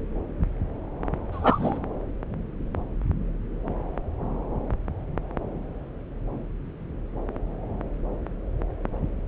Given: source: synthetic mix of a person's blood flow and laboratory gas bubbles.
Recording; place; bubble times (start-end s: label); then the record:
Doppler ultrasound of blood flow; subclavian vein
1.32-1.78 s: bubbles
From the record:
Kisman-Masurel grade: 212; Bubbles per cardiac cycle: several, 3 to 8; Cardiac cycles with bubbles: 1 to 10%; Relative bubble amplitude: moderate (0.250 to 0.450); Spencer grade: 1 (occasional bubble signal discernible with the cardiac motion signal, with majority of cardiac periods free of bubbles); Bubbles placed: anywhere in the cardiac cycle